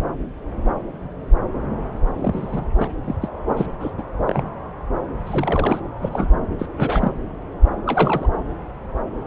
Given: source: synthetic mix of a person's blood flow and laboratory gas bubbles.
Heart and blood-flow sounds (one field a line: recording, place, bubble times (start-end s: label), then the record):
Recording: Doppler ultrasound of blood flow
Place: subclavian vein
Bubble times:
2.16-2.69 s: bubbles
2.78-2.89 s: bubbles
3.04-3.15 s: bubbles
3.21-3.28 s: bubbles
3.56-3.66 s: bubbles
3.80-3.92 s: bubbles
3.97-4.02 s: bubbles
4.27-4.51 s: bubbles
5.25-5.79 s: bubbles
6.00-6.31 s: bubbles
6.58-6.66 s: bubbles
6.77-7.12 s: bubbles
7.86-8.27 s: bubbles
From the record:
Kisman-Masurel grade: 232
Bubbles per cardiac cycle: several, 3 to 8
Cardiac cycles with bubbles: 50 to 99%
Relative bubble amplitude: moderate (0.250 to 0.450)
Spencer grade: 3 (all of the cardiac periods contain showers or single bubble signals, but not dominating or overriding the cardiac motion signals)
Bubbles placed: anywhere in the cardiac cycle